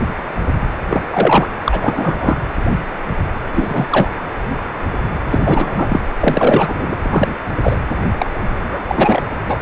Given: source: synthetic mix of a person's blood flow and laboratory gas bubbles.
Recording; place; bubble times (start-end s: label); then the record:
Doppler ultrasound of blood flow; precordium
0.90-1.04 s: bubbles
1.09-1.48 s: bubbles
1.64-2.36 s: bubbles
3.54-3.86 s: bubbles
3.90-4.09 s: bubbles
5.31-5.40 s: bubbles
5.43-6.01 s: bubbles
6.20-6.97 s: bubbles
7.02-7.43 s: bubbles
7.63-7.79 s: bubbles
8.18-8.30 s: bubbles
8.60-8.84 s: bubbles
8.87-9.21 s: bubbles
9.50-9.58 s: bubbles
From the record:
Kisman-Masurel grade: 233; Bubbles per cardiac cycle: several, 3 to 8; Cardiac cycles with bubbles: 50 to 99%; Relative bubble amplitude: loud (0.450 to 0.775); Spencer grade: 3 (all of the cardiac periods contain showers or single bubble signals, but not dominating or overriding the cardiac motion signals); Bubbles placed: anywhere in the cardiac cycle